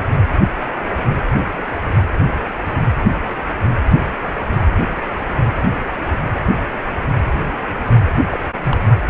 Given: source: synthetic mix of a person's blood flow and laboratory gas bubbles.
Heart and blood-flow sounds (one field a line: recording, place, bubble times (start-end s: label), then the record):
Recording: Doppler ultrasound of blood flow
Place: precordium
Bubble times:
8.30-8.40 s: bubbles
8.62-8.77 s: bubbles
From the record:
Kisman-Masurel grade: 212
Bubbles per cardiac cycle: several, 3 to 8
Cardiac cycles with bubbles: 1 to 10%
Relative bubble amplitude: moderate (0.250 to 0.450)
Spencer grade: 1 (occasional bubble signal discernible with the cardiac motion signal, with majority of cardiac periods free of bubbles)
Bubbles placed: anywhere in the cardiac cycle